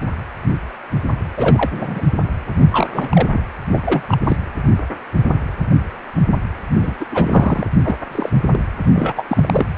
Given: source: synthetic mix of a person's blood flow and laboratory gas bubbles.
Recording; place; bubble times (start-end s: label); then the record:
Doppler ultrasound of blood flow; precordium
1.36-2.02 s: bubbles
2.59-3.28 s: bubbles
3.33-3.40 s: bubbles
3.73-4.03 s: bubbles
4.08-4.18 s: bubbles
4.26-4.37 s: bubbles
6.79-6.96 s: bubbles
7.00-7.04 s: bubbles
7.12-7.67 s: bubbles
7.84-7.96 s: bubbles
8.12-8.29 s: bubbles
8.53-8.60 s: bubbles
8.85-9.25 s: bubbles
9.28-9.66 s: bubbles
From the record:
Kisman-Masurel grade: 232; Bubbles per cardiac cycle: several, 3 to 8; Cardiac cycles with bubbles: 50 to 99%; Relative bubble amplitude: moderate (0.250 to 0.450); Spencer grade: 3 (all of the cardiac periods contain showers or single bubble signals, but not dominating or overriding the cardiac motion signals); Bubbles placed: anywhere in the cardiac cycle